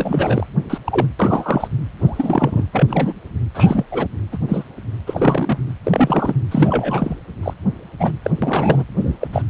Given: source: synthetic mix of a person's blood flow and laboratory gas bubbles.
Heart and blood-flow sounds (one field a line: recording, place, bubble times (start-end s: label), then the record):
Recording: Doppler ultrasound of blood flow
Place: precordium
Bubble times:
0.00-0.47 s: bubbles
0.70-0.78 s: bubbles
0.85-1.07 s: bubbles
1.19-1.67 s: bubbles
2.00-2.64 s: bubbles
2.73-3.14 s: bubbles
3.54-3.85 s: bubbles
3.91-4.08 s: bubbles
4.32-4.38 s: bubbles
4.48-4.65 s: bubbles
5.07-5.58 s: bubbles
5.83-6.34 s: bubbles
6.51-7.16 s: bubbles
7.42-7.54 s: bubbles
7.99-8.11 s: bubbles
8.22-8.30 s: bubbles
8.42-8.83 s: bubbles
9.00-9.17 s: bubbles
9.20-9.28 s: bubbles
9.32-9.42 s: bubbles
From the record:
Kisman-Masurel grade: 243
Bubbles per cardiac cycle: several, 3 to 8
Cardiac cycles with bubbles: 100%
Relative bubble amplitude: loud (0.450 to 0.775)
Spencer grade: 3 (all of the cardiac periods contain showers or single bubble signals, but not dominating or overriding the cardiac motion signals)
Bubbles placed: anywhere in the cardiac cycle